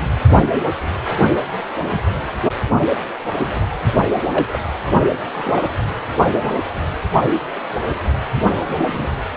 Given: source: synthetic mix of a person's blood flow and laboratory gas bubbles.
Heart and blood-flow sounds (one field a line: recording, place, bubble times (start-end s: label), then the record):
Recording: Doppler ultrasound of blood flow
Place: precordium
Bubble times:
1.91-1.99 s: bubbles
3.38-3.67 s: bubbles
4.32-4.45 s: bubbles
4.52-4.59 s: bubbles
5.31-5.75 s: bubbles
8.78-9.08 s: bubbles
From the record:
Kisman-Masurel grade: 122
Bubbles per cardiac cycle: 1 to 2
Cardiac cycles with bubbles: 10 to 50%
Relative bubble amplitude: moderate (0.250 to 0.450)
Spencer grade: 2 (many but less than half of the cardiac periods contain bubble signals, singularly or in groups)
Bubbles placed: only in the low amplitude regions of the cardiac cycle